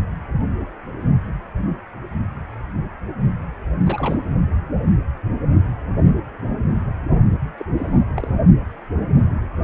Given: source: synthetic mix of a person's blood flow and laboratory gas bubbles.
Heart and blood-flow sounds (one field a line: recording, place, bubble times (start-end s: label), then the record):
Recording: Doppler ultrasound of blood flow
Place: precordium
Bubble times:
3.85-4.22 s: bubbles
7.57-7.66 s: bubbles
7.76-8.04 s: bubbles
8.16-8.29 s: bubbles
From the record:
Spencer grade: 2 (many but less than half of the cardiac periods contain bubble signals, singularly or in groups)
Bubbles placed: only in the low amplitude regions of the cardiac cycle